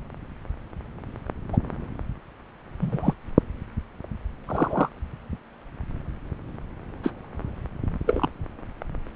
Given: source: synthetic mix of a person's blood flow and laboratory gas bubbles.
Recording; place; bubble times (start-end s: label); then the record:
Doppler ultrasound of blood flow; subclavian vein
1.52-1.58 s: bubbles
2.81-3.14 s: bubbles
4.48-4.89 s: bubbles
7.03-7.12 s: bubbles
8.06-8.29 s: bubbles
From the record:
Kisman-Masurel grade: 123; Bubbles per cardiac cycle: 1 to 2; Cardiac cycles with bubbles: 10 to 50%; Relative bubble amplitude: loud (0.450 to 0.775); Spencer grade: 2 (many but less than half of the cardiac periods contain bubble signals, singularly or in groups); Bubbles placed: anywhere in the cardiac cycle